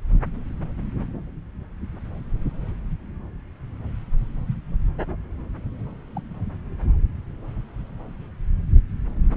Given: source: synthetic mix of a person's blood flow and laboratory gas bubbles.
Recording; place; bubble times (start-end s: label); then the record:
Doppler ultrasound of blood flow; subclavian vein
6.16-6.21 s: bubbles
9.34-9.37 s: bubbles
From the record:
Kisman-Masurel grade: 121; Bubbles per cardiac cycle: 1 to 2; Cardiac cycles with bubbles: 10 to 50%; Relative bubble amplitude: barely perceptible (0.100 to 0.250); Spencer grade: 2 (many but less than half of the cardiac periods contain bubble signals, singularly or in groups); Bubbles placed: anywhere in the cardiac cycle